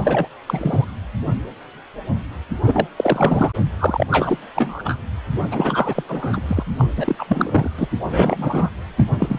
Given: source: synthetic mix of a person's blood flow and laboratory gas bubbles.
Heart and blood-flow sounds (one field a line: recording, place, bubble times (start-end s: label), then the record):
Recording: Doppler ultrasound of blood flow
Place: precordium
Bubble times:
0.00-0.29 s: bubbles
0.46-0.84 s: bubbles
2.62-2.88 s: bubbles
2.96-3.52 s: bubbles
3.79-4.07 s: bubbles
4.10-4.38 s: bubbles
4.54-4.99 s: bubbles
5.51-6.04 s: bubbles
6.08-6.40 s: bubbles
6.47-6.64 s: bubbles
6.78-6.85 s: bubbles
6.96-7.69 s: bubbles
7.77-7.88 s: bubbles
8.09-8.70 s: bubbles
8.98-9.05 s: bubbles
9.18-9.39 s: bubbles
From the record:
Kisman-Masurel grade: 333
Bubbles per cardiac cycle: rolling drumbeat, 9 or more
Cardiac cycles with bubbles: 50 to 99%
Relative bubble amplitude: loud (0.450 to 0.775)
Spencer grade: 3 (all of the cardiac periods contain showers or single bubble signals, but not dominating or overriding the cardiac motion signals)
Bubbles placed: anywhere in the cardiac cycle